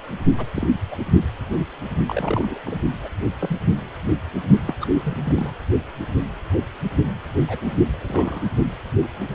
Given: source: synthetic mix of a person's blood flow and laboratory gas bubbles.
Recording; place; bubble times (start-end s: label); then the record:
Doppler ultrasound of blood flow; precordium
0.38-0.45 s: bubbles
0.55-0.68 s: bubbles
0.91-0.95 s: bubbles
0.99-1.04 s: bubbles
2.06-2.59 s: bubbles
2.65-2.77 s: bubbles
3.03-3.09 s: bubbles
3.39-3.56 s: bubbles
4.67-4.75 s: bubbles
4.81-4.87 s: bubbles
5.03-5.52 s: bubbles
7.47-7.79 s: bubbles
7.91-8.49 s: bubbles
From the record:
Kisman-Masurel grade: 222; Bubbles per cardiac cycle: several, 3 to 8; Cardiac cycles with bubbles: 10 to 50%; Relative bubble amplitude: moderate (0.250 to 0.450); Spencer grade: 2 (many but less than half of the cardiac periods contain bubble signals, singularly or in groups); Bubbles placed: only in the low amplitude regions of the cardiac cycle